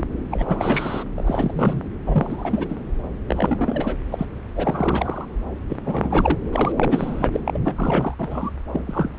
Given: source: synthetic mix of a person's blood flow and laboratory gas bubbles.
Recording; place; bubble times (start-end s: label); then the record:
Doppler ultrasound of blood flow; subclavian vein
0.00-0.04 s: bubbles
0.31-1.04 s: bubbles
1.15-1.83 s: bubbles
2.06-2.81 s: bubbles
3.28-3.96 s: bubbles
4.11-4.25 s: bubbles
4.55-5.25 s: bubbles
5.69-5.76 s: bubbles
5.85-6.39 s: bubbles
6.51-6.72 s: bubbles
6.76-7.40 s: bubbles
7.45-7.58 s: bubbles
7.65-8.15 s: bubbles
8.18-8.51 s: bubbles
8.72-9.10 s: bubbles
From the record:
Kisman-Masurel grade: 343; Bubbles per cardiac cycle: rolling drumbeat, 9 or more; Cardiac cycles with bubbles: 100%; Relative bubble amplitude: loud (0.450 to 0.775); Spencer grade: 3 (all of the cardiac periods contain showers or single bubble signals, but not dominating or overriding the cardiac motion signals); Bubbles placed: anywhere in the cardiac cycle